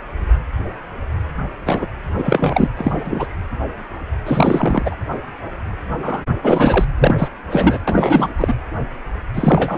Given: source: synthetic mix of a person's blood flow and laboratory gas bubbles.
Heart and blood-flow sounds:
Doppler ultrasound of blood flow; precordium
1.66-1.86 s: bubbles
2.18-2.68 s: bubbles
2.76-2.92 s: bubbles
3.05-3.27 s: bubbles
4.25-4.96 s: bubbles
6.02-6.24 s: bubbles
6.43-6.85 s: bubbles
6.98-7.28 s: bubbles
7.50-7.78 s: bubbles
7.87-8.29 s: bubbles
8.38-8.54 s: bubbles
9.34-9.78 s: bubbles
From the record:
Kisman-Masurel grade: 333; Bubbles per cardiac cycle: rolling drumbeat, 9 or more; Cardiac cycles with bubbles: 50 to 99%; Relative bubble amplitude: loud (0.450 to 0.775); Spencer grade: 3 (all of the cardiac periods contain showers or single bubble signals, but not dominating or overriding the cardiac motion signals); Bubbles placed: anywhere in the cardiac cycle

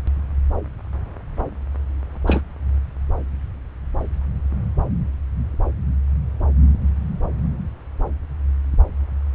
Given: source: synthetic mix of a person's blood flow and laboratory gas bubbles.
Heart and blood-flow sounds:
Doppler ultrasound of blood flow; subclavian vein
2.26-2.41 s: bubbles
From the record:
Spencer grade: 1 (occasional bubble signal discernible with the cardiac motion signal, with majority of cardiac periods free of bubbles); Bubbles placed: anywhere in the cardiac cycle

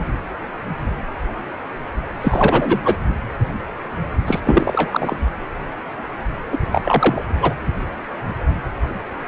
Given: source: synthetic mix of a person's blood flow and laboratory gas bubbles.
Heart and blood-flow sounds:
Doppler ultrasound of blood flow; precordium
2.21-3.00 s: bubbles
4.27-4.40 s: bubbles
4.45-5.16 s: bubbles
6.51-6.59 s: bubbles
6.71-7.22 s: bubbles
7.41-7.54 s: bubbles
From the record:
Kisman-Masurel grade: 223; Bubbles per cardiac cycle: several, 3 to 8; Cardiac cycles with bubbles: 10 to 50%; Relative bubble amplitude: loud (0.450 to 0.775); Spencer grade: 2 (many but less than half of the cardiac periods contain bubble signals, singularly or in groups); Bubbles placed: anywhere in the cardiac cycle

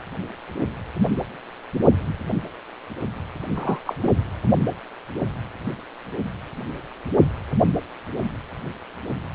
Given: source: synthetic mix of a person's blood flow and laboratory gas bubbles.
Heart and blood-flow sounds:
Doppler ultrasound of blood flow; precordium
3.55-3.78 s: bubbles
3.85-3.95 s: bubbles
4.03-4.11 s: bubbles
From the record:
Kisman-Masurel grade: 212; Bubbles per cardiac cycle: several, 3 to 8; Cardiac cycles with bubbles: 1 to 10%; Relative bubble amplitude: moderate (0.250 to 0.450); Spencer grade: 1 (occasional bubble signal discernible with the cardiac motion signal, with majority of cardiac periods free of bubbles); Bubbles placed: only in the low amplitude regions of the cardiac cycle

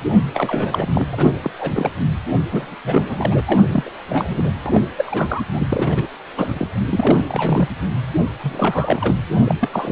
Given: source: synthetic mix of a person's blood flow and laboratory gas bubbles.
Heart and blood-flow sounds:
Doppler ultrasound of blood flow; precordium
0.33-1.07 s: bubbles
1.12-1.34 s: bubbles
1.44-1.51 s: bubbles
1.58-1.72 s: bubbles
1.75-1.92 s: bubbles
2.51-2.75 s: bubbles
2.84-3.42 s: bubbles
3.46-3.64 s: bubbles
3.71-3.92 s: bubbles
4.09-4.51 s: bubbles
4.66-4.80 s: bubbles
4.96-5.43 s: bubbles
5.53-5.66 s: bubbles
5.69-6.08 s: bubbles
6.37-6.68 s: bubbles
6.89-7.68 s: bubbles
8.41-9.15 s: bubbles
9.44-9.55 s: bubbles
9.61-9.69 s: bubbles
9.73-9.92 s: bubbles
From the record:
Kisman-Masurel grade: 342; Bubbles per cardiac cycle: rolling drumbeat, 9 or more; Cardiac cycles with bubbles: 100%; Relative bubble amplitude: moderate (0.250 to 0.450); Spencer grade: 3 (all of the cardiac periods contain showers or single bubble signals, but not dominating or overriding the cardiac motion signals); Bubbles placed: anywhere in the cardiac cycle

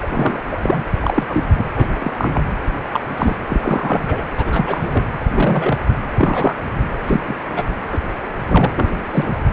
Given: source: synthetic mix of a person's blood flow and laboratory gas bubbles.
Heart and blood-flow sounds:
Doppler ultrasound of blood flow; precordium
0.02-0.41 s: bubbles
0.51-0.57 s: bubbles
0.63-0.81 s: bubbles
1.01-1.46 s: bubbles
1.54-1.64 s: bubbles
1.75-1.87 s: bubbles
1.98-2.12 s: bubbles
2.17-2.52 s: bubbles
2.93-3.00 s: bubbles
3.17-3.35 s: bubbles
3.49-4.23 s: bubbles
4.36-5.04 s: bubbles
5.33-5.80 s: bubbles
6.17-6.54 s: bubbles
7.03-7.21 s: bubbles
7.28-7.34 s: bubbles
7.56-7.63 s: bubbles
7.92-7.99 s: bubbles
8.48-8.94 s: bubbles
9.12-9.33 s: bubbles
From the record:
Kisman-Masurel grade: 243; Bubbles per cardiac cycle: several, 3 to 8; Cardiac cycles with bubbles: 100%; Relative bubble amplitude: loud (0.450 to 0.775); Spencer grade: 3 (all of the cardiac periods contain showers or single bubble signals, but not dominating or overriding the cardiac motion signals); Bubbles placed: anywhere in the cardiac cycle

